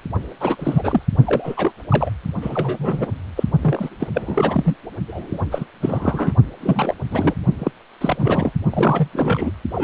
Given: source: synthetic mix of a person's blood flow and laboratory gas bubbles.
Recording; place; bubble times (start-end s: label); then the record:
Doppler ultrasound of blood flow; precordium
0.40-0.56 s: bubbles
0.58-1.03 s: bubbles
1.25-1.72 s: bubbles
1.90-2.10 s: bubbles
2.41-3.10 s: bubbles
3.35-3.44 s: bubbles
3.61-3.89 s: bubbles
3.99-4.08 s: bubbles
4.13-4.76 s: bubbles
5.08-5.42 s: bubbles
5.51-5.64 s: bubbles
5.81-6.33 s: bubbles
6.60-6.95 s: bubbles
7.10-7.34 s: bubbles
7.58-7.71 s: bubbles
8.01-8.52 s: bubbles
8.70-9.08 s: bubbles
9.13-9.51 s: bubbles
9.75-9.84 s: bubbles
From the record:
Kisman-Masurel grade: 343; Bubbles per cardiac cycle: rolling drumbeat, 9 or more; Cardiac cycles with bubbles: 100%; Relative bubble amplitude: loud (0.450 to 0.775); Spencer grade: 3 (all of the cardiac periods contain showers or single bubble signals, but not dominating or overriding the cardiac motion signals); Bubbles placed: only in the low amplitude regions of the cardiac cycle